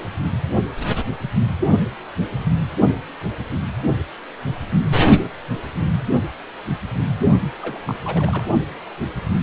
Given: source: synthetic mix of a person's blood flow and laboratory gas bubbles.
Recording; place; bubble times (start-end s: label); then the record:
Doppler ultrasound of blood flow; precordium
7.60-7.95 s: bubbles
8.04-8.45 s: bubbles
From the record:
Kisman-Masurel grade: 211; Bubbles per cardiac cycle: several, 3 to 8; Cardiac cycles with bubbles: 1 to 10%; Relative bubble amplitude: barely perceptible (0.100 to 0.250); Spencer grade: 1 (occasional bubble signal discernible with the cardiac motion signal, with majority of cardiac periods free of bubbles); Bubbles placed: only in the low amplitude regions of the cardiac cycle